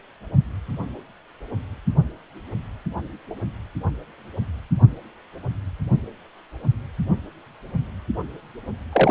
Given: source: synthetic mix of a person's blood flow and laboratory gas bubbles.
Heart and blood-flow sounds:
Doppler ultrasound of blood flow; precordium
8.92-9.11 s: bubbles
From the record:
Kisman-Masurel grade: 122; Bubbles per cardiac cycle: 1 to 2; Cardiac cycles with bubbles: 10 to 50%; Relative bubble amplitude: moderate (0.250 to 0.450); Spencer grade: 2 (many but less than half of the cardiac periods contain bubble signals, singularly or in groups); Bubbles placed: only in the low amplitude regions of the cardiac cycle

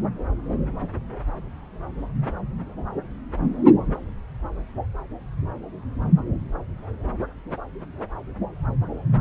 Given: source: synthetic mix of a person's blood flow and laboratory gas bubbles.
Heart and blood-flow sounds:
Doppler ultrasound of blood flow; subclavian vein
no bubbles
From the record:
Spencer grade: 0 (complete lack of bubble signals)

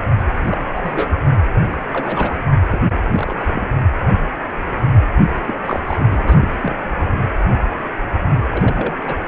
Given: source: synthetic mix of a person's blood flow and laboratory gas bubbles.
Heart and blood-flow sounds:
Doppler ultrasound of blood flow; precordium
0.29-0.34 s: bubbles
0.42-0.66 s: bubbles
0.71-1.10 s: bubbles
1.70-1.78 s: bubbles
1.93-2.37 s: bubbles
2.69-2.79 s: bubbles
3.11-3.62 s: bubbles
5.46-5.54 s: bubbles
5.66-5.79 s: bubbles
5.87-6.47 s: bubbles
6.62-6.75 s: bubbles
8.52-8.94 s: bubbles
9.07-9.15 s: bubbles
From the record:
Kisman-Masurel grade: 232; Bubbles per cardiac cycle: several, 3 to 8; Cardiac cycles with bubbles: 50 to 99%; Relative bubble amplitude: moderate (0.250 to 0.450); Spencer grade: 3 (all of the cardiac periods contain showers or single bubble signals, but not dominating or overriding the cardiac motion signals); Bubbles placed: only in the low amplitude regions of the cardiac cycle

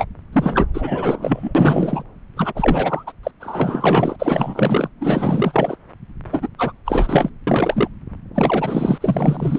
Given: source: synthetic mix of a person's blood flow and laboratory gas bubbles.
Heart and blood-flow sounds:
Doppler ultrasound of blood flow; subclavian vein
0.00-0.06 s: bubbles
0.32-0.67 s: bubbles
0.73-2.03 s: bubbles
2.37-3.04 s: bubbles
3.07-3.12 s: bubbles
3.23-3.31 s: bubbles
3.40-4.16 s: bubbles
4.19-4.89 s: bubbles
5.00-5.76 s: bubbles
6.31-6.48 s: bubbles
6.58-6.73 s: bubbles
6.85-7.29 s: bubbles
7.47-7.88 s: bubbles
8.34-9.59 s: bubbles
From the record:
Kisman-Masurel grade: 444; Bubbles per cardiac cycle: continuous sound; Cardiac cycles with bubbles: 100%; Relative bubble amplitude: maximal (0.775 to 0.999); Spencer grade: 4 (maximum detectable bubble signal sounding continuously throughout systole and diastole of every cardiac period, and overriding the amplitude of the normal cardiac signals); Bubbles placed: anywhere in the cardiac cycle

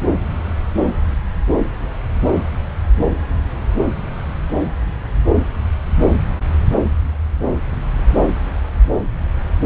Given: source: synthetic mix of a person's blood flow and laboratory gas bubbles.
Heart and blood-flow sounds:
Doppler ultrasound of blood flow; subclavian vein
no bubbles
From the record:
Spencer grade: 0 (complete lack of bubble signals)

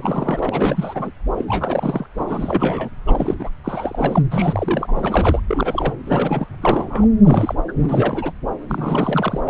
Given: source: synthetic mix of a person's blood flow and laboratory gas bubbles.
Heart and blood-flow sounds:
Doppler ultrasound of blood flow; subclavian vein
0.00-1.10 s: bubbles
1.35-1.45 s: bubbles
1.48-2.06 s: bubbles
2.17-2.89 s: bubbles
3.07-3.35 s: bubbles
3.39-3.50 s: bubbles
3.64-4.22 s: bubbles
4.31-4.92 s: bubbles
4.96-5.40 s: bubbles
5.48-5.94 s: bubbles
6.06-6.48 s: bubbles
6.62-7.07 s: bubbles
7.24-7.54 s: bubbles
7.68-7.73 s: bubbles
7.80-8.31 s: bubbles
8.69-9.40 s: bubbles
9.47-9.50 s: bubbles
From the record:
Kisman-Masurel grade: 342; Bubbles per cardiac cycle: rolling drumbeat, 9 or more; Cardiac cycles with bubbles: 100%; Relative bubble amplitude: moderate (0.250 to 0.450); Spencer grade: 3 (all of the cardiac periods contain showers or single bubble signals, but not dominating or overriding the cardiac motion signals); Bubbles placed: anywhere in the cardiac cycle

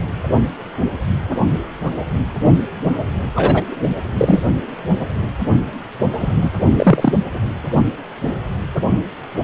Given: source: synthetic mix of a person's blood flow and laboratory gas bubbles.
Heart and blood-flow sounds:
Doppler ultrasound of blood flow; precordium
3.35-3.63 s: bubbles
4.17-4.40 s: bubbles
6.18-6.51 s: bubbles
6.77-7.12 s: bubbles
From the record:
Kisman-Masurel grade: 123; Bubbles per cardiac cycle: 1 to 2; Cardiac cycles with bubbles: 10 to 50%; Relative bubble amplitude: loud (0.450 to 0.775); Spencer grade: 2 (many but less than half of the cardiac periods contain bubble signals, singularly or in groups); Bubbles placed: only in the low amplitude regions of the cardiac cycle

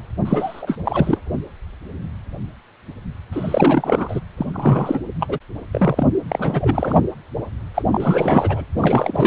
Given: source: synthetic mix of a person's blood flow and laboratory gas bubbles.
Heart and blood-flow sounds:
Doppler ultrasound of blood flow; precordium
0.25-0.78 s: bubbles
0.84-1.18 s: bubbles
3.33-4.20 s: bubbles
4.37-4.46 s: bubbles
4.53-5.00 s: bubbles
5.20-5.38 s: bubbles
5.72-6.07 s: bubbles
6.28-7.00 s: bubbles
7.74-7.82 s: bubbles
7.91-8.64 s: bubbles
8.77-9.26 s: bubbles
From the record:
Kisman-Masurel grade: 333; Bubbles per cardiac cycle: rolling drumbeat, 9 or more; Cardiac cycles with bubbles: 50 to 99%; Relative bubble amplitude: loud (0.450 to 0.775); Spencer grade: 3 (all of the cardiac periods contain showers or single bubble signals, but not dominating or overriding the cardiac motion signals); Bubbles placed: anywhere in the cardiac cycle

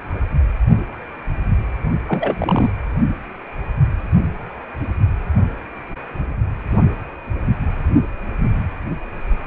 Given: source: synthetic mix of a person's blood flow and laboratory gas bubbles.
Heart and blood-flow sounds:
Doppler ultrasound of blood flow; precordium
2.06-2.71 s: bubbles
From the record:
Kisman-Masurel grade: 212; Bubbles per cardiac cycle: several, 3 to 8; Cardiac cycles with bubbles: 1 to 10%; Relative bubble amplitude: moderate (0.250 to 0.450); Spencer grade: 1 (occasional bubble signal discernible with the cardiac motion signal, with majority of cardiac periods free of bubbles); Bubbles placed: only in the low amplitude regions of the cardiac cycle

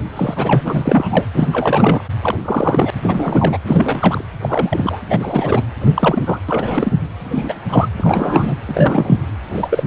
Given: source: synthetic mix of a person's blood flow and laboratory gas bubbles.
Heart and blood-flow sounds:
Doppler ultrasound of blood flow; precordium
0.16-0.61 s: bubbles
0.65-1.25 s: bubbles
1.33-1.48 s: bubbles
1.52-2.04 s: bubbles
2.23-2.91 s: bubbles
3.02-3.58 s: bubbles
3.65-4.25 s: bubbles
4.41-4.97 s: bubbles
5.09-5.62 s: bubbles
5.80-6.39 s: bubbles
6.48-6.92 s: bubbles
7.24-7.60 s: bubbles
7.69-7.88 s: bubbles
7.97-8.54 s: bubbles
8.67-9.17 s: bubbles
9.53-9.84 s: bubbles
From the record:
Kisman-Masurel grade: 333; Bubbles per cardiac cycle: rolling drumbeat, 9 or more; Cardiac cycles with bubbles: 50 to 99%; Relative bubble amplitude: loud (0.450 to 0.775); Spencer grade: 3 (all of the cardiac periods contain showers or single bubble signals, but not dominating or overriding the cardiac motion signals); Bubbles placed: anywhere in the cardiac cycle

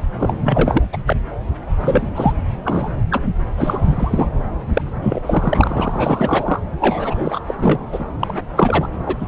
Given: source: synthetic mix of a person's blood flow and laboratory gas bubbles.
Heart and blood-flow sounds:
Doppler ultrasound of blood flow; subclavian vein
0.00-0.03 s: bubbles
0.19-0.36 s: bubbles
0.43-0.83 s: bubbles
0.93-0.97 s: bubbles
1.06-1.16 s: bubbles
1.80-2.08 s: bubbles
2.15-2.33 s: bubbles
2.64-2.95 s: bubbles
3.10-3.23 s: bubbles
3.57-4.27 s: bubbles
4.73-4.82 s: bubbles
5.01-5.22 s: bubbles
5.25-6.60 s: bubbles
6.80-7.40 s: bubbles
7.46-7.54 s: bubbles
7.58-7.80 s: bubbles
7.92-8.05 s: bubbles
8.20-8.38 s: bubbles
8.56-8.89 s: bubbles
9.05-9.16 s: bubbles
9.20-9.28 s: bubbles
From the record:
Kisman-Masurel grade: 343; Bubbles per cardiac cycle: rolling drumbeat, 9 or more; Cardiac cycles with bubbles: 100%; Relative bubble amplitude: loud (0.450 to 0.775); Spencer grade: 3 (all of the cardiac periods contain showers or single bubble signals, but not dominating or overriding the cardiac motion signals); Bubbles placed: anywhere in the cardiac cycle

